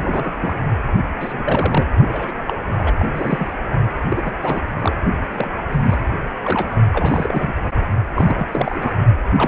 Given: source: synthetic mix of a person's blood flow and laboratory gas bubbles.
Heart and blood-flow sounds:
Doppler ultrasound of blood flow; precordium
0.00-0.56 s: bubbles
1.20-1.89 s: bubbles
2.06-2.35 s: bubbles
2.46-2.54 s: bubbles
2.77-2.95 s: bubbles
3.00-3.08 s: bubbles
3.15-3.50 s: bubbles
4.09-4.34 s: bubbles
4.42-4.60 s: bubbles
4.79-4.96 s: bubbles
5.33-5.50 s: bubbles
5.55-5.62 s: bubbles
5.71-6.00 s: bubbles
6.44-6.67 s: bubbles
6.92-7.68 s: bubbles
8.14-8.47 s: bubbles
8.52-8.94 s: bubbles
9.37-9.48 s: bubbles
From the record:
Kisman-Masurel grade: 342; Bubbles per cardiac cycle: rolling drumbeat, 9 or more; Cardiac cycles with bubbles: 100%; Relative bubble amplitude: moderate (0.250 to 0.450); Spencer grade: 3 (all of the cardiac periods contain showers or single bubble signals, but not dominating or overriding the cardiac motion signals); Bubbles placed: only in the low amplitude regions of the cardiac cycle

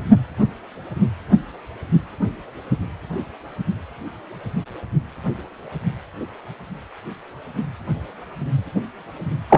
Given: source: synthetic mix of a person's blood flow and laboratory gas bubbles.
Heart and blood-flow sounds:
Doppler ultrasound of blood flow; precordium
9.49-9.58 s: bubbles
From the record:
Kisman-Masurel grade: 213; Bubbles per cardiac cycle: several, 3 to 8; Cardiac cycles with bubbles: 1 to 10%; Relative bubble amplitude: loud (0.450 to 0.775); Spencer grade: 1 (occasional bubble signal discernible with the cardiac motion signal, with majority of cardiac periods free of bubbles); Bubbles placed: anywhere in the cardiac cycle

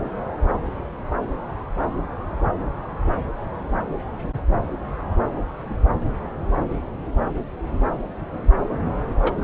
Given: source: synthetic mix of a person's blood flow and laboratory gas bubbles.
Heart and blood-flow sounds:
Doppler ultrasound of blood flow; subclavian vein
9.22-9.32 s: bubbles
9.38-9.44 s: bubbles
From the record:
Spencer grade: 1 (occasional bubble signal discernible with the cardiac motion signal, with majority of cardiac periods free of bubbles); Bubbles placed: anywhere in the cardiac cycle

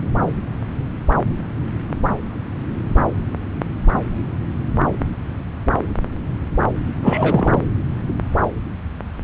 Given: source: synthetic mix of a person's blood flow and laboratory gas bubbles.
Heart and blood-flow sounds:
Doppler ultrasound of blood flow; subclavian vein
7.03-7.62 s: bubbles
From the record:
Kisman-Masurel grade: 213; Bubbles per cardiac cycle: several, 3 to 8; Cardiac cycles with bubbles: 1 to 10%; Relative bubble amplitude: loud (0.450 to 0.775); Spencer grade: 1 (occasional bubble signal discernible with the cardiac motion signal, with majority of cardiac periods free of bubbles); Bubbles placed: anywhere in the cardiac cycle

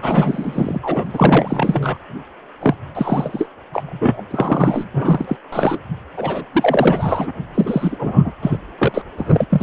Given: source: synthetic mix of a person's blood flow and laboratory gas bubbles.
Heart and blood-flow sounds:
Doppler ultrasound of blood flow; precordium
0.02-0.80 s: bubbles
0.83-1.08 s: bubbles
1.10-1.98 s: bubbles
2.62-2.75 s: bubbles
2.95-3.48 s: bubbles
3.73-3.83 s: bubbles
3.86-4.22 s: bubbles
4.30-4.85 s: bubbles
4.93-5.25 s: bubbles
5.27-5.37 s: bubbles
5.52-5.78 s: bubbles
6.17-6.44 s: bubbles
6.53-7.31 s: bubbles
7.54-8.32 s: bubbles
8.42-8.58 s: bubbles
8.78-9.02 s: bubbles
9.18-9.46 s: bubbles
9.50-9.63 s: bubbles
From the record:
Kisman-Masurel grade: 343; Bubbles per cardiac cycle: rolling drumbeat, 9 or more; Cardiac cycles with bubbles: 100%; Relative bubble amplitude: loud (0.450 to 0.775); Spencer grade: 3 (all of the cardiac periods contain showers or single bubble signals, but not dominating or overriding the cardiac motion signals); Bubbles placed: anywhere in the cardiac cycle

